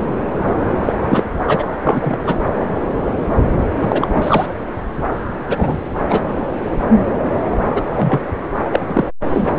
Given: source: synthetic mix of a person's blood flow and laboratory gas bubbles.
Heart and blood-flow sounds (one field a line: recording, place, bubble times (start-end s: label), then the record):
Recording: Doppler ultrasound of blood flow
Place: subclavian vein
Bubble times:
0.83-0.93 s: bubbles
1.01-1.27 s: bubbles
1.47-1.66 s: bubbles
1.83-2.18 s: bubbles
2.25-2.35 s: bubbles
3.80-4.07 s: bubbles
4.15-4.46 s: bubbles
5.49-5.77 s: bubbles
6.09-6.21 s: bubbles
7.75-7.82 s: bubbles
7.93-8.21 s: bubbles
8.72-8.79 s: bubbles
8.88-9.04 s: bubbles
9.33-9.54 s: bubbles
From the record:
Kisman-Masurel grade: 233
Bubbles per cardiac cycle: several, 3 to 8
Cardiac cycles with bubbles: 50 to 99%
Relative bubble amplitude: loud (0.450 to 0.775)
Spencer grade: 3 (all of the cardiac periods contain showers or single bubble signals, but not dominating or overriding the cardiac motion signals)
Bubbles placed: anywhere in the cardiac cycle